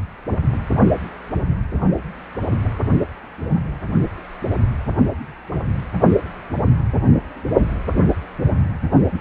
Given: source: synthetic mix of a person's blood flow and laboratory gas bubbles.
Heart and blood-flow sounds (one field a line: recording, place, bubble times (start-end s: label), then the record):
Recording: Doppler ultrasound of blood flow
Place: precordium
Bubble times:
9.10-9.21 s: bubbles
From the record:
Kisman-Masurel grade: 212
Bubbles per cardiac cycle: several, 3 to 8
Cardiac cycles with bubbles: 1 to 10%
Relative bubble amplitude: moderate (0.250 to 0.450)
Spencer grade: 1 (occasional bubble signal discernible with the cardiac motion signal, with majority of cardiac periods free of bubbles)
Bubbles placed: only in the low amplitude regions of the cardiac cycle